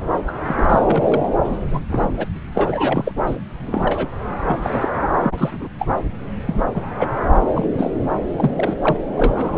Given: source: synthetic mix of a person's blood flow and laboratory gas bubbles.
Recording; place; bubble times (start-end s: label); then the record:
Doppler ultrasound of blood flow; subclavian vein
0.27-0.33 s: bubbles
0.45-0.66 s: bubbles
0.68-1.29 s: bubbles
1.44-1.52 s: bubbles
1.60-1.85 s: bubbles
1.89-2.26 s: bubbles
2.54-3.12 s: bubbles
3.26-3.36 s: bubbles
3.67-4.08 s: bubbles
4.47-4.89 s: bubbles
5.23-5.68 s: bubbles
5.79-5.87 s: bubbles
6.47-6.54 s: bubbles
6.74-6.83 s: bubbles
6.99-7.08 s: bubbles
7.56-7.68 s: bubbles
7.78-7.92 s: bubbles
8.39-8.51 s: bubbles
8.55-8.74 s: bubbles
8.81-8.96 s: bubbles
9.17-9.58 s: bubbles
From the record:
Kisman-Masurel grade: 242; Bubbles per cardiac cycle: several, 3 to 8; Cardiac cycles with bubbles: 100%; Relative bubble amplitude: moderate (0.250 to 0.450); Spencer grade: 3 (all of the cardiac periods contain showers or single bubble signals, but not dominating or overriding the cardiac motion signals); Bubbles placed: anywhere in the cardiac cycle